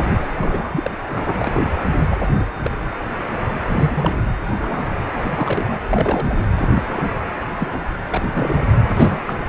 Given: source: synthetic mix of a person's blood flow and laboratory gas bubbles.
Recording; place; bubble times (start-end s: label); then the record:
Doppler ultrasound of blood flow; precordium
0.21-0.27 s: bubbles
0.37-0.91 s: bubbles
1.09-1.35 s: bubbles
1.38-1.71 s: bubbles
2.11-2.50 s: bubbles
2.63-2.71 s: bubbles
3.67-4.15 s: bubbles
4.47-4.83 s: bubbles
5.15-5.79 s: bubbles
5.90-6.47 s: bubbles
6.57-6.83 s: bubbles
6.87-7.08 s: bubbles
7.59-7.88 s: bubbles
8.13-8.21 s: bubbles
8.35-8.63 s: bubbles
8.96-9.34 s: bubbles
From the record:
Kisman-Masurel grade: 232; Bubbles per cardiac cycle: several, 3 to 8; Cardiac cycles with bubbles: 50 to 99%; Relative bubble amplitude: moderate (0.250 to 0.450); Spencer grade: 3 (all of the cardiac periods contain showers or single bubble signals, but not dominating or overriding the cardiac motion signals); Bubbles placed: anywhere in the cardiac cycle